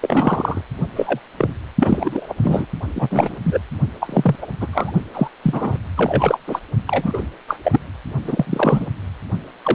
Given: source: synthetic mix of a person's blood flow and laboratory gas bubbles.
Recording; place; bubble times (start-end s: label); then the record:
Doppler ultrasound of blood flow; precordium
0.02-0.61 s: bubbles
0.96-1.20 s: bubbles
1.38-1.53 s: bubbles
1.80-2.35 s: bubbles
2.42-2.67 s: bubbles
2.95-3.37 s: bubbles
3.43-3.59 s: bubbles
4.00-4.35 s: bubbles
4.42-4.46 s: bubbles
4.60-4.67 s: bubbles
4.72-4.92 s: bubbles
5.13-5.28 s: bubbles
5.43-5.77 s: bubbles
5.96-6.38 s: bubbles
6.47-6.60 s: bubbles
6.87-7.23 s: bubbles
7.47-7.59 s: bubbles
7.63-7.79 s: bubbles
8.24-8.87 s: bubbles
9.63-9.74 s: bubbles
From the record:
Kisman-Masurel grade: 243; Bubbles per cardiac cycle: several, 3 to 8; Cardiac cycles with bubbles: 100%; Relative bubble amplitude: loud (0.450 to 0.775); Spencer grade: 3 (all of the cardiac periods contain showers or single bubble signals, but not dominating or overriding the cardiac motion signals); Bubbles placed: only in the low amplitude regions of the cardiac cycle